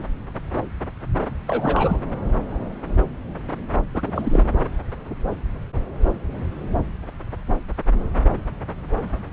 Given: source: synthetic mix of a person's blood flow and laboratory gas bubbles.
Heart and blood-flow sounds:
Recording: Doppler ultrasound of blood flow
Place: subclavian vein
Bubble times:
0.00-0.06 s: bubbles
1.47-2.01 s: bubbles
3.93-4.45 s: bubbles
From the record:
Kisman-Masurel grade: 222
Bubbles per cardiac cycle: several, 3 to 8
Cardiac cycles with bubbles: 10 to 50%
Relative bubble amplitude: moderate (0.250 to 0.450)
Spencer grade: 2 (many but less than half of the cardiac periods contain bubble signals, singularly or in groups)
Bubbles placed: anywhere in the cardiac cycle

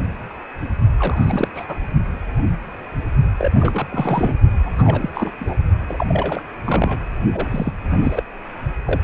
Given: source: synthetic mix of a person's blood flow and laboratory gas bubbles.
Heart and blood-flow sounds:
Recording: Doppler ultrasound of blood flow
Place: precordium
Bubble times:
0.99-1.48 s: bubbles
1.54-1.65 s: bubbles
1.67-1.77 s: bubbles
3.38-3.51 s: bubbles
3.60-3.87 s: bubbles
3.91-4.36 s: bubbles
4.64-5.09 s: bubbles
5.14-5.31 s: bubbles
5.39-5.55 s: bubbles
5.88-6.05 s: bubbles
6.08-6.42 s: bubbles
6.64-7.00 s: bubbles
7.32-7.71 s: bubbles
7.90-7.98 s: bubbles
8.01-8.23 s: bubbles
8.86-9.01 s: bubbles
From the record:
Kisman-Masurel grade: 332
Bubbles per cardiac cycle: rolling drumbeat, 9 or more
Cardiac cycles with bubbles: 50 to 99%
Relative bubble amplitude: moderate (0.250 to 0.450)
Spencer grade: 3 (all of the cardiac periods contain showers or single bubble signals, but not dominating or overriding the cardiac motion signals)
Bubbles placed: only in the low amplitude regions of the cardiac cycle

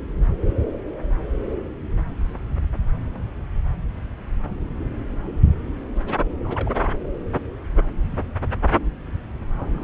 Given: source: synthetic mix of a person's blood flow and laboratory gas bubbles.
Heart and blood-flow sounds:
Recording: Doppler ultrasound of blood flow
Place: subclavian vein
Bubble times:
6.45-6.89 s: bubbles
7.04-7.08 s: bubbles
9.57-9.84 s: bubbles
From the record:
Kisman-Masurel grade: 221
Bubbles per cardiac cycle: several, 3 to 8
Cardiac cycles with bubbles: 10 to 50%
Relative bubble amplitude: barely perceptible (0.100 to 0.250)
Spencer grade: 2 (many but less than half of the cardiac periods contain bubble signals, singularly or in groups)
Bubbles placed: anywhere in the cardiac cycle

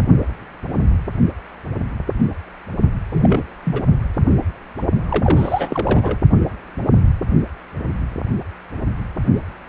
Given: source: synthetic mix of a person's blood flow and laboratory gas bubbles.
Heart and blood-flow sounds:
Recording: Doppler ultrasound of blood flow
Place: precordium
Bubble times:
3.12-3.45 s: bubbles
3.64-3.83 s: bubbles
5.09-6.17 s: bubbles
From the record:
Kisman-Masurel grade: 222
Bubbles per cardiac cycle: several, 3 to 8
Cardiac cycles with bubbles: 10 to 50%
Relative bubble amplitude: moderate (0.250 to 0.450)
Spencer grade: 2 (many but less than half of the cardiac periods contain bubble signals, singularly or in groups)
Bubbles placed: only in the low amplitude regions of the cardiac cycle

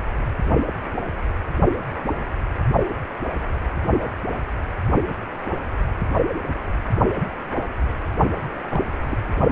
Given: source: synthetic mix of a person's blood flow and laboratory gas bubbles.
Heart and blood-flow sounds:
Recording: Doppler ultrasound of blood flow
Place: precordium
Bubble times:
8.71-8.81 s: bubbles
9.04-9.21 s: bubbles
From the record:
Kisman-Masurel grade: 111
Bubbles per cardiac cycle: 1 to 2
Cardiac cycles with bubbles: 1 to 10%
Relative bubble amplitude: barely perceptible (0.100 to 0.250)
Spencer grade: 1 (occasional bubble signal discernible with the cardiac motion signal, with majority of cardiac periods free of bubbles)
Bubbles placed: only in the low amplitude regions of the cardiac cycle

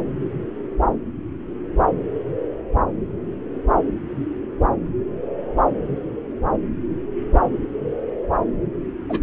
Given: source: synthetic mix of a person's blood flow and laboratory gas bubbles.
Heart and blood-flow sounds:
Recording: Doppler ultrasound of blood flow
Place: subclavian vein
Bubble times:
9.09-9.21 s: bubbles
From the record:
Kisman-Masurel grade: 112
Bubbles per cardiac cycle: 1 to 2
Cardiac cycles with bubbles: 1 to 10%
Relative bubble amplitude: moderate (0.250 to 0.450)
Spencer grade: 1 (occasional bubble signal discernible with the cardiac motion signal, with majority of cardiac periods free of bubbles)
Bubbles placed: anywhere in the cardiac cycle

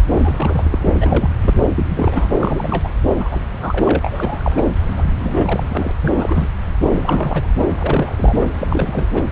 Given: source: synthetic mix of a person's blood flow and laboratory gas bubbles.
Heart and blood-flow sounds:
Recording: Doppler ultrasound of blood flow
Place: subclavian vein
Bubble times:
0.10-0.78 s: bubbles
0.84-0.97 s: bubbles
1.00-1.34 s: bubbles
1.42-1.60 s: bubbles
1.69-2.89 s: bubbles
3.20-3.29 s: bubbles
3.31-3.40 s: bubbles
3.61-3.99 s: bubbles
4.01-4.62 s: bubbles
4.97-5.04 s: bubbles
5.19-5.92 s: bubbles
6.01-6.12 s: bubbles
6.16-6.46 s: bubbles
6.83-7.52 s: bubbles
7.57-7.67 s: bubbles
7.75-8.36 s: bubbles
8.39-8.47 s: bubbles
8.60-9.07 s: bubbles
9.13-9.25 s: bubbles
From the record:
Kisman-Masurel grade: 342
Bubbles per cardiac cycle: rolling drumbeat, 9 or more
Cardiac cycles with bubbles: 100%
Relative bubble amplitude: moderate (0.250 to 0.450)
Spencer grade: 3 (all of the cardiac periods contain showers or single bubble signals, but not dominating or overriding the cardiac motion signals)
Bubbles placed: anywhere in the cardiac cycle

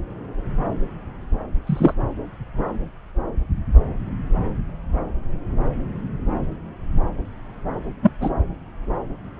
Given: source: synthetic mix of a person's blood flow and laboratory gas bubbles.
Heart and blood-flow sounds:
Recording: Doppler ultrasound of blood flow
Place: subclavian vein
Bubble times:
1.67-1.93 s: bubbles
8.01-8.12 s: bubbles
8.21-8.29 s: bubbles
From the record:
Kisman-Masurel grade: 123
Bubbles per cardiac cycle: 1 to 2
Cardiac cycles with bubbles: 10 to 50%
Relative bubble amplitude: loud (0.450 to 0.775)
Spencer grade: 2 (many but less than half of the cardiac periods contain bubble signals, singularly or in groups)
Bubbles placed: anywhere in the cardiac cycle

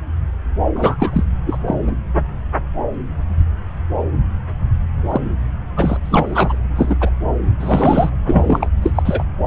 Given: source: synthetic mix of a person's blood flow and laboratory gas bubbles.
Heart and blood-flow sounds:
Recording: Doppler ultrasound of blood flow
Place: subclavian vein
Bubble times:
0.75-0.96 s: bubbles
0.99-1.25 s: bubbles
1.47-1.57 s: bubbles
1.67-1.75 s: bubbles
1.87-1.92 s: bubbles
5.09-5.21 s: bubbles
5.77-5.97 s: bubbles
6.04-6.56 s: bubbles
6.75-6.96 s: bubbles
7.00-7.10 s: bubbles
7.60-8.11 s: bubbles
8.26-8.70 s: bubbles
8.82-8.91 s: bubbles
8.95-9.03 s: bubbles
9.05-9.23 s: bubbles
From the record:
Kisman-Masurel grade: 233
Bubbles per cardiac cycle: several, 3 to 8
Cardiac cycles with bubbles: 50 to 99%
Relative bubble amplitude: loud (0.450 to 0.775)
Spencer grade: 3 (all of the cardiac periods contain showers or single bubble signals, but not dominating or overriding the cardiac motion signals)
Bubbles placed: anywhere in the cardiac cycle

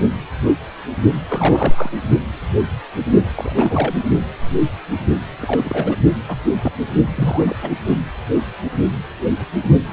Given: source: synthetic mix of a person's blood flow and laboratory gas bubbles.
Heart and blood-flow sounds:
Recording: Doppler ultrasound of blood flow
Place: precordium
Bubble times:
1.28-1.90 s: bubbles
3.35-3.94 s: bubbles
5.40-5.96 s: bubbles
6.28-6.36 s: bubbles
6.62-6.72 s: bubbles
7.16-7.56 s: bubbles
7.62-7.70 s: bubbles
9.90-9.93 s: bubbles
From the record:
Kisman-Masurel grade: 232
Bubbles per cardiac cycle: several, 3 to 8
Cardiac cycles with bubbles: 50 to 99%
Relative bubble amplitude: moderate (0.250 to 0.450)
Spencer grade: 3 (all of the cardiac periods contain showers or single bubble signals, but not dominating or overriding the cardiac motion signals)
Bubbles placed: only in the low amplitude regions of the cardiac cycle

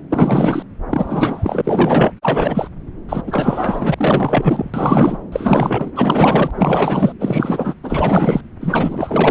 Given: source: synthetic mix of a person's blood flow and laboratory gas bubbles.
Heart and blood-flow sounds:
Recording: Doppler ultrasound of blood flow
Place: subclavian vein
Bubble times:
0.10-0.62 s: bubbles
0.91-2.12 s: bubbles
2.22-2.69 s: bubbles
3.08-3.23 s: bubbles
3.26-3.95 s: bubbles
3.97-4.71 s: bubbles
4.74-5.18 s: bubbles
5.32-5.92 s: bubbles
5.96-6.51 s: bubbles
6.54-7.13 s: bubbles
7.19-7.74 s: bubbles
7.83-8.41 s: bubbles
8.60-9.31 s: bubbles
From the record:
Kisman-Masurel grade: 444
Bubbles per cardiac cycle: continuous sound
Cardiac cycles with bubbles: 100%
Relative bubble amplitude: maximal (0.775 to 0.999)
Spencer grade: 4 (maximum detectable bubble signal sounding continuously throughout systole and diastole of every cardiac period, and overriding the amplitude of the normal cardiac signals)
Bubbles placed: anywhere in the cardiac cycle

